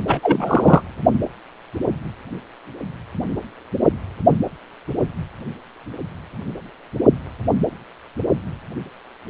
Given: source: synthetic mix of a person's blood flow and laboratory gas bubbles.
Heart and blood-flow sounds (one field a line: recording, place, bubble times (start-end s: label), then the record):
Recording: Doppler ultrasound of blood flow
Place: precordium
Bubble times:
0.07-0.20 s: bubbles
0.23-0.81 s: bubbles
From the record:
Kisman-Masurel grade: 223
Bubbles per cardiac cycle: several, 3 to 8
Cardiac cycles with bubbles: 10 to 50%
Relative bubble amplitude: loud (0.450 to 0.775)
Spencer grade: 2 (many but less than half of the cardiac periods contain bubble signals, singularly or in groups)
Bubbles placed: anywhere in the cardiac cycle